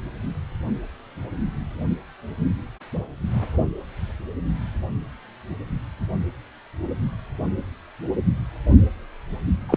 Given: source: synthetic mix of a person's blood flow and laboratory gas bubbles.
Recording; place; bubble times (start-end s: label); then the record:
Doppler ultrasound of blood flow; precordium
9.69-9.77 s: bubbles
From the record:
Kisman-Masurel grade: 123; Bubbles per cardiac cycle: 1 to 2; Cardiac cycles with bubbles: 10 to 50%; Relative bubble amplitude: loud (0.450 to 0.775); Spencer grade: 2 (many but less than half of the cardiac periods contain bubble signals, singularly or in groups); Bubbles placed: only in the low amplitude regions of the cardiac cycle